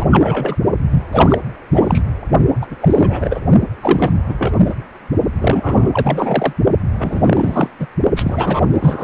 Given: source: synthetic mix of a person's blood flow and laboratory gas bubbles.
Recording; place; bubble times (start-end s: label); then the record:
Doppler ultrasound of blood flow; precordium
0.00-0.56 s: bubbles
0.91-1.03 s: bubbles
1.12-1.42 s: bubbles
1.73-2.02 s: bubbles
2.61-2.67 s: bubbles
2.71-2.76 s: bubbles
2.81-3.40 s: bubbles
3.80-4.13 s: bubbles
4.29-4.35 s: bubbles
4.38-4.57 s: bubbles
4.65-4.74 s: bubbles
5.39-6.53 s: bubbles
6.98-7.70 s: bubbles
7.79-7.87 s: bubbles
8.16-8.65 s: bubbles
8.71-9.04 s: bubbles
From the record:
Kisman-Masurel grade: 343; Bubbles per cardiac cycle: rolling drumbeat, 9 or more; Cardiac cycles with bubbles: 100%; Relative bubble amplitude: loud (0.450 to 0.775); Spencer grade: 3 (all of the cardiac periods contain showers or single bubble signals, but not dominating or overriding the cardiac motion signals); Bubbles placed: only in the low amplitude regions of the cardiac cycle